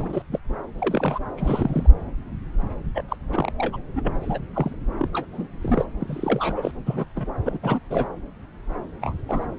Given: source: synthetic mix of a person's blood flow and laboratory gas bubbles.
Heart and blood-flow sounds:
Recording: Doppler ultrasound of blood flow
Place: subclavian vein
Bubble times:
0.00-0.23 s: bubbles
0.32-0.39 s: bubbles
0.79-1.19 s: bubbles
1.37-1.88 s: bubbles
2.94-3.02 s: bubbles
3.08-3.16 s: bubbles
3.32-3.52 s: bubbles
3.58-3.77 s: bubbles
3.96-4.14 s: bubbles
4.21-4.38 s: bubbles
4.53-4.77 s: bubbles
4.99-5.08 s: bubbles
5.13-5.26 s: bubbles
5.33-5.47 s: bubbles
5.62-5.85 s: bubbles
6.01-6.71 s: bubbles
6.86-7.06 s: bubbles
7.16-7.28 s: bubbles
7.45-7.58 s: bubbles
7.62-7.79 s: bubbles
7.90-8.07 s: bubbles
9.01-9.14 s: bubbles
9.29-9.46 s: bubbles
From the record:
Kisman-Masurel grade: 232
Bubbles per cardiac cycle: several, 3 to 8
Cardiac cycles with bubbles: 50 to 99%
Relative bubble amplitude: moderate (0.250 to 0.450)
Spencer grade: 3 (all of the cardiac periods contain showers or single bubble signals, but not dominating or overriding the cardiac motion signals)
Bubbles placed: anywhere in the cardiac cycle

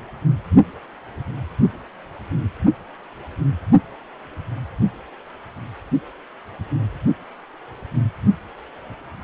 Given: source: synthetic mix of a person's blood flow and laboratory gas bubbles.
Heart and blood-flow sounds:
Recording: Doppler ultrasound of blood flow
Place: precordium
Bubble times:
no bubbles
From the record:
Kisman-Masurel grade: 000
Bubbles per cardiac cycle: 0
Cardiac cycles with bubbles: 0%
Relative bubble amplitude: no bubbles discernible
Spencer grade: 0 (complete lack of bubble signals)

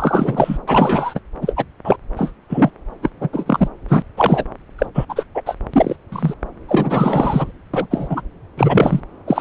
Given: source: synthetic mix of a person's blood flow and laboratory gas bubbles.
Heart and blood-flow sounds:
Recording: Doppler ultrasound of blood flow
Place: subclavian vein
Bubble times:
0.00-0.57 s: bubbles
0.67-1.19 s: bubbles
1.41-1.65 s: bubbles
1.84-1.97 s: bubbles
2.17-2.31 s: bubbles
2.49-2.70 s: bubbles
3.02-3.10 s: bubbles
3.20-3.29 s: bubbles
3.33-3.68 s: bubbles
3.88-4.02 s: bubbles
4.17-4.44 s: bubbles
4.78-4.86 s: bubbles
4.94-5.05 s: bubbles
5.09-5.24 s: bubbles
5.34-5.42 s: bubbles
5.46-5.55 s: bubbles
5.73-5.96 s: bubbles
6.12-6.34 s: bubbles
6.68-7.51 s: bubbles
7.73-7.87 s: bubbles
7.90-8.21 s: bubbles
8.57-9.00 s: bubbles
9.27-9.41 s: bubbles
From the record:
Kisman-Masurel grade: 243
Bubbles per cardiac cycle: several, 3 to 8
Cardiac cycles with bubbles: 100%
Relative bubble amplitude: loud (0.450 to 0.775)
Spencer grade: 3 (all of the cardiac periods contain showers or single bubble signals, but not dominating or overriding the cardiac motion signals)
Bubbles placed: anywhere in the cardiac cycle

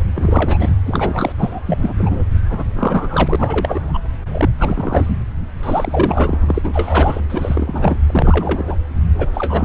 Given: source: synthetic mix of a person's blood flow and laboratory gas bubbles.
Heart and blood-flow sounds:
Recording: Doppler ultrasound of blood flow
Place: subclavian vein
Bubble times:
0.12-0.70 s: bubbles
0.85-1.32 s: bubbles
1.38-1.60 s: bubbles
1.67-1.78 s: bubbles
1.81-2.24 s: bubbles
2.50-2.65 s: bubbles
2.75-3.36 s: bubbles
3.39-3.99 s: bubbles
4.31-4.49 s: bubbles
4.59-5.17 s: bubbles
5.63-6.37 s: bubbles
6.48-7.21 s: bubbles
7.29-7.99 s: bubbles
8.06-8.63 s: bubbles
8.67-8.78 s: bubbles
9.18-9.28 s: bubbles
9.34-9.65 s: bubbles
From the record:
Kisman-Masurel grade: 342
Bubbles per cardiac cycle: rolling drumbeat, 9 or more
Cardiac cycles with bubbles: 100%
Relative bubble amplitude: moderate (0.250 to 0.450)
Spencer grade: 3 (all of the cardiac periods contain showers or single bubble signals, but not dominating or overriding the cardiac motion signals)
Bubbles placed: anywhere in the cardiac cycle

